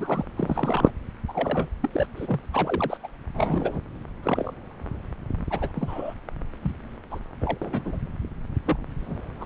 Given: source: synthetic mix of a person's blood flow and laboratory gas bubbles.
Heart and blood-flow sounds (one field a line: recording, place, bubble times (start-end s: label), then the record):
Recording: Doppler ultrasound of blood flow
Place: subclavian vein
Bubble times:
0.00-0.25 s: bubbles
0.36-0.92 s: bubbles
1.28-1.70 s: bubbles
1.82-1.90 s: bubbles
1.93-2.07 s: bubbles
2.16-2.40 s: bubbles
2.52-2.97 s: bubbles
3.03-3.07 s: bubbles
3.34-3.79 s: bubbles
4.22-4.54 s: bubbles
5.50-5.72 s: bubbles
5.75-6.14 s: bubbles
6.62-6.77 s: bubbles
7.10-7.20 s: bubbles
7.41-7.58 s: bubbles
7.61-7.98 s: bubbles
8.66-8.77 s: bubbles
9.01-9.28 s: bubbles
9.41-9.46 s: bubbles
From the record:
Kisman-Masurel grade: 242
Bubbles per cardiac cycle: several, 3 to 8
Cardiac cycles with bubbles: 100%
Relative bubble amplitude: moderate (0.250 to 0.450)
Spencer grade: 3 (all of the cardiac periods contain showers or single bubble signals, but not dominating or overriding the cardiac motion signals)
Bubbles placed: anywhere in the cardiac cycle